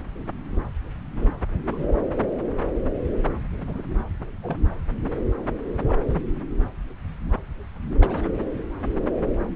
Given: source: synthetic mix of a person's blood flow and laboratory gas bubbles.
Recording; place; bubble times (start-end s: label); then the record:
Doppler ultrasound of blood flow; subclavian vein
1.21-1.28 s: bubbles
1.70-1.87 s: bubbles
3.58-3.82 s: bubbles
4.42-4.57 s: bubbles
5.85-5.99 s: bubbles
6.08-6.22 s: bubbles
8.00-8.29 s: bubbles
From the record:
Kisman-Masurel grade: 121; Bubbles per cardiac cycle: 1 to 2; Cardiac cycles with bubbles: 10 to 50%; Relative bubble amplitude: barely perceptible (0.100 to 0.250); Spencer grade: 2 (many but less than half of the cardiac periods contain bubble signals, singularly or in groups); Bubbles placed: anywhere in the cardiac cycle